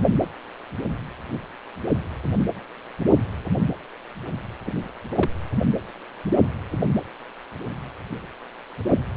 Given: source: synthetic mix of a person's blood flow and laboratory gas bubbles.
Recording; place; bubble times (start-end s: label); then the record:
Doppler ultrasound of blood flow; precordium
4.65-4.72 s: bubbles
5.10-5.29 s: bubbles
From the record:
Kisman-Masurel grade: 111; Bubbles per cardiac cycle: 1 to 2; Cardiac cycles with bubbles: 1 to 10%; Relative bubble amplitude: barely perceptible (0.100 to 0.250); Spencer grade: 1 (occasional bubble signal discernible with the cardiac motion signal, with majority of cardiac periods free of bubbles); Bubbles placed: anywhere in the cardiac cycle